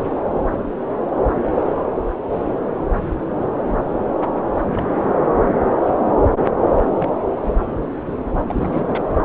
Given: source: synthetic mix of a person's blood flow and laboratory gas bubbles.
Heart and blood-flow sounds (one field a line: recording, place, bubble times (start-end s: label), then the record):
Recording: Doppler ultrasound of blood flow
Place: subclavian vein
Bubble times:
4.53-4.64 s: bubbles
4.70-4.91 s: bubbles
6.84-7.12 s: bubbles
8.49-9.04 s: bubbles
From the record:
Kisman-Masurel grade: 221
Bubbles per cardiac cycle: several, 3 to 8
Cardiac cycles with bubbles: 10 to 50%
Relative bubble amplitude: barely perceptible (0.100 to 0.250)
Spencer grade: 2 (many but less than half of the cardiac periods contain bubble signals, singularly or in groups)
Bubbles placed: anywhere in the cardiac cycle